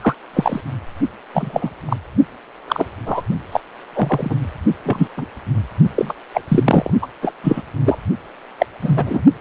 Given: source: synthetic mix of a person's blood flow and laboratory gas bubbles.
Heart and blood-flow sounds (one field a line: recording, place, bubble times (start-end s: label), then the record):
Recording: Doppler ultrasound of blood flow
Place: precordium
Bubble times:
0.01-0.15 s: bubbles
0.33-0.60 s: bubbles
1.34-1.70 s: bubbles
1.86-1.97 s: bubbles
2.67-2.85 s: bubbles
3.05-3.22 s: bubbles
3.51-3.60 s: bubbles
3.93-4.36 s: bubbles
4.84-5.08 s: bubbles
5.17-5.26 s: bubbles
5.96-6.14 s: bubbles
6.33-6.42 s: bubbles
6.48-6.90 s: bubbles
7.02-7.07 s: bubbles
7.21-7.32 s: bubbles
7.43-7.62 s: bubbles
7.85-7.98 s: bubbles
8.58-8.66 s: bubbles
8.82-9.22 s: bubbles
From the record:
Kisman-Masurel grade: 243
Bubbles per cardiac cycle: several, 3 to 8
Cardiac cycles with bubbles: 100%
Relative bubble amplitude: loud (0.450 to 0.775)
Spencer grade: 3 (all of the cardiac periods contain showers or single bubble signals, but not dominating or overriding the cardiac motion signals)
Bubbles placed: only in the low amplitude regions of the cardiac cycle